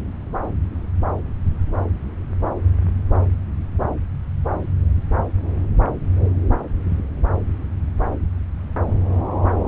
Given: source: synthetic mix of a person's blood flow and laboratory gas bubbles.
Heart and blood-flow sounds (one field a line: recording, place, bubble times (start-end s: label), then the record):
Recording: Doppler ultrasound of blood flow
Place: subclavian vein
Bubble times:
no bubbles
From the record:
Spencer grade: 0 (complete lack of bubble signals)